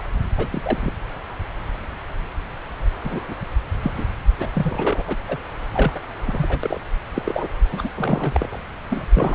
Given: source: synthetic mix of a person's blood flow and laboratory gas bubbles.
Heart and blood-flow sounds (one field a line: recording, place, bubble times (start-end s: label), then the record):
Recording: Doppler ultrasound of blood flow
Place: subclavian vein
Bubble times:
0.00-0.02 s: bubbles
0.37-0.47 s: bubbles
0.52-0.92 s: bubbles
3.04-3.20 s: bubbles
3.28-3.34 s: bubbles
3.82-3.92 s: bubbles
3.97-4.06 s: bubbles
4.39-4.48 s: bubbles
4.54-5.03 s: bubbles
5.07-5.16 s: bubbles
5.29-5.37 s: bubbles
5.73-5.92 s: bubbles
5.95-6.00 s: bubbles
6.25-6.58 s: bubbles
6.63-6.80 s: bubbles
7.15-7.22 s: bubbles
7.25-7.48 s: bubbles
7.72-7.90 s: bubbles
7.96-8.64 s: bubbles
8.90-9.05 s: bubbles
9.13-9.34 s: bubbles
From the record:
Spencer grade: 3 (all of the cardiac periods contain showers or single bubble signals, but not dominating or overriding the cardiac motion signals)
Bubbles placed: anywhere in the cardiac cycle